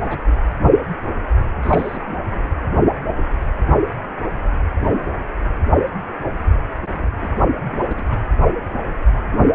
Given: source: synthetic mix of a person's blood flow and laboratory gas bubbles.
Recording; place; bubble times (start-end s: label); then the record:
Doppler ultrasound of blood flow; precordium
0.00-0.23 s: bubbles
0.28-0.31 s: bubbles
1.62-2.01 s: bubbles
2.06-2.18 s: bubbles
2.31-2.46 s: bubbles
6.94-7.44 s: bubbles
7.63-8.21 s: bubbles
9.32-9.55 s: bubbles
From the record:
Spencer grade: 2 (many but less than half of the cardiac periods contain bubble signals, singularly or in groups); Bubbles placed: anywhere in the cardiac cycle